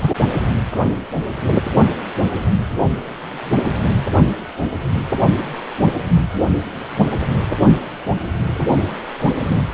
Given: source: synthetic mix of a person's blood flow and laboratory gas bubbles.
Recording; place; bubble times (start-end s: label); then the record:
Doppler ultrasound of blood flow; precordium
9.47-9.57 s: bubbles
From the record:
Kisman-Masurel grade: 122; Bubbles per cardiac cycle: 1 to 2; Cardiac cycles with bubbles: 10 to 50%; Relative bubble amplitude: moderate (0.250 to 0.450); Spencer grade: 2 (many but less than half of the cardiac periods contain bubble signals, singularly or in groups); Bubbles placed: only in the low amplitude regions of the cardiac cycle